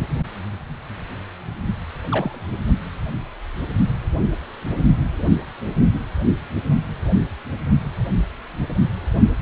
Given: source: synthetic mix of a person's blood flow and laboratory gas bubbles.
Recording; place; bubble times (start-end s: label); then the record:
Doppler ultrasound of blood flow; precordium
2.11-2.54 s: bubbles
From the record:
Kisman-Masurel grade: 111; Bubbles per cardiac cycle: 1 to 2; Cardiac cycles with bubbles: 1 to 10%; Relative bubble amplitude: barely perceptible (0.100 to 0.250); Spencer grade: 1 (occasional bubble signal discernible with the cardiac motion signal, with majority of cardiac periods free of bubbles); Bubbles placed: anywhere in the cardiac cycle